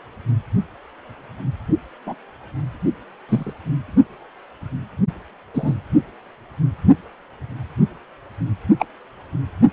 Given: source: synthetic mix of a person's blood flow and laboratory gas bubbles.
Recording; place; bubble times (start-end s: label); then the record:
Doppler ultrasound of blood flow; precordium
2.06-2.15 s: bubbles
3.29-3.52 s: bubbles
5.54-5.74 s: bubbles
8.79-8.86 s: bubbles
From the record:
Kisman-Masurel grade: 122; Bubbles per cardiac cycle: 1 to 2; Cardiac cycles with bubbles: 10 to 50%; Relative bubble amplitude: moderate (0.250 to 0.450); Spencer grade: 2 (many but less than half of the cardiac periods contain bubble signals, singularly or in groups); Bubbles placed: only in the low amplitude regions of the cardiac cycle